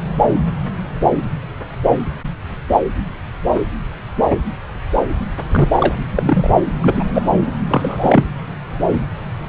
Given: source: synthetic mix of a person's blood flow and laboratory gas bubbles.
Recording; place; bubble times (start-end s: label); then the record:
Doppler ultrasound of blood flow; subclavian vein
5.51-5.69 s: bubbles
5.75-5.95 s: bubbles
6.15-6.50 s: bubbles
6.81-7.04 s: bubbles
7.14-7.22 s: bubbles
7.68-8.24 s: bubbles
From the record:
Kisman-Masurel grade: 223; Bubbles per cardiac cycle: several, 3 to 8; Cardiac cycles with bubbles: 10 to 50%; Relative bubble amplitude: loud (0.450 to 0.775); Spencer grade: 2 (many but less than half of the cardiac periods contain bubble signals, singularly or in groups); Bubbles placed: anywhere in the cardiac cycle